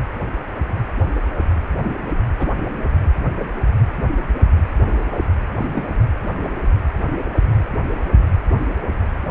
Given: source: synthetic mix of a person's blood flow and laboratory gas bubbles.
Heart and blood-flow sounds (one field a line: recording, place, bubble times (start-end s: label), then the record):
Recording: Doppler ultrasound of blood flow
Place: precordium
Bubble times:
2.39-2.47 s: bubbles
5.58-5.85 s: bubbles
From the record:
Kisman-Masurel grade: 122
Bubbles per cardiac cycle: 1 to 2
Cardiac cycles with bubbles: 10 to 50%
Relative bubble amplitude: moderate (0.250 to 0.450)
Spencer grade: 2 (many but less than half of the cardiac periods contain bubble signals, singularly or in groups)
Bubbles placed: anywhere in the cardiac cycle